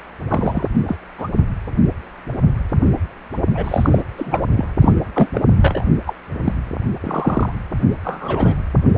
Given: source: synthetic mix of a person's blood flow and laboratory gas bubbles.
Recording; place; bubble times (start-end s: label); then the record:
Doppler ultrasound of blood flow; precordium
0.29-0.68 s: bubbles
0.86-0.96 s: bubbles
1.18-1.28 s: bubbles
3.54-4.03 s: bubbles
4.17-4.42 s: bubbles
4.57-4.65 s: bubbles
4.82-4.94 s: bubbles
5.13-5.29 s: bubbles
5.35-5.41 s: bubbles
5.57-5.85 s: bubbles
6.06-6.14 s: bubbles
6.44-6.54 s: bubbles
7.00-7.52 s: bubbles
8.04-8.55 s: bubbles
From the record:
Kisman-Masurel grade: 233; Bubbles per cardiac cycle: several, 3 to 8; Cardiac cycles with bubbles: 50 to 99%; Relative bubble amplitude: loud (0.450 to 0.775); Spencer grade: 3 (all of the cardiac periods contain showers or single bubble signals, but not dominating or overriding the cardiac motion signals); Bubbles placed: only in the low amplitude regions of the cardiac cycle